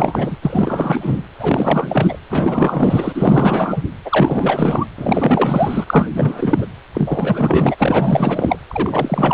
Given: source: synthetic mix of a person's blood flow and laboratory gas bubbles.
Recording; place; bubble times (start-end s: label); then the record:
Doppler ultrasound of blood flow; precordium
0.00-0.37 s: bubbles
0.42-1.21 s: bubbles
1.39-2.19 s: bubbles
2.29-3.83 s: bubbles
4.05-4.86 s: bubbles
4.98-6.08 s: bubbles
6.13-6.66 s: bubbles
6.94-8.57 s: bubbles
8.68-9.34 s: bubbles
From the record:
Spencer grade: 4 (maximum detectable bubble signal sounding continuously throughout systole and diastole of every cardiac period, and overriding the amplitude of the normal cardiac signals); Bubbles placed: anywhere in the cardiac cycle